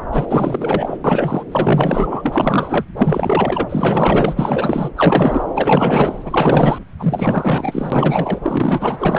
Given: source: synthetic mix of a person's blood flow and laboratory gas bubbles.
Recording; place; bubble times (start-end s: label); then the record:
Doppler ultrasound of blood flow; subclavian vein
0.12-0.97 s: bubbles
1.04-1.44 s: bubbles
1.52-2.85 s: bubbles
2.97-4.33 s: bubbles
4.35-4.89 s: bubbles
4.96-5.44 s: bubbles
5.55-6.19 s: bubbles
6.24-6.78 s: bubbles
6.99-8.39 s: bubbles
8.43-8.98 s: bubbles
9.00-9.19 s: bubbles
From the record:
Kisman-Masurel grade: 444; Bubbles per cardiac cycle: continuous sound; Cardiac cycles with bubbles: 100%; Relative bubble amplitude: maximal (0.775 to 0.999); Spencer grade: 4 (maximum detectable bubble signal sounding continuously throughout systole and diastole of every cardiac period, and overriding the amplitude of the normal cardiac signals); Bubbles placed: anywhere in the cardiac cycle